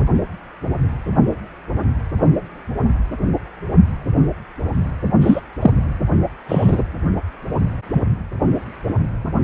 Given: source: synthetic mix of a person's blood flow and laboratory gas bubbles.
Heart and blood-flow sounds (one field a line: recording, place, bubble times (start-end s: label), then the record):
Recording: Doppler ultrasound of blood flow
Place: precordium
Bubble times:
5.21-5.41 s: bubbles
5.62-5.71 s: bubbles
6.49-6.83 s: bubbles
From the record:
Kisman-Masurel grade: 123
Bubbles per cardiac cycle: 1 to 2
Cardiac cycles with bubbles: 10 to 50%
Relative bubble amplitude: loud (0.450 to 0.775)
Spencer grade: 2 (many but less than half of the cardiac periods contain bubble signals, singularly or in groups)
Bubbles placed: anywhere in the cardiac cycle